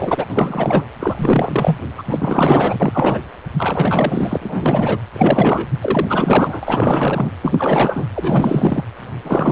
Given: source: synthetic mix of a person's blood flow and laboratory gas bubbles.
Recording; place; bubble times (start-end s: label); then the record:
Doppler ultrasound of blood flow; precordium
0.00-0.26 s: bubbles
0.30-0.85 s: bubbles
1.00-1.77 s: bubbles
1.98-2.03 s: bubbles
2.09-3.21 s: bubbles
3.58-4.99 s: bubbles
5.13-5.68 s: bubbles
5.81-7.31 s: bubbles
7.41-8.04 s: bubbles
8.14-8.83 s: bubbles
9.24-9.52 s: bubbles
From the record:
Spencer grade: 4 (maximum detectable bubble signal sounding continuously throughout systole and diastole of every cardiac period, and overriding the amplitude of the normal cardiac signals); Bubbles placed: anywhere in the cardiac cycle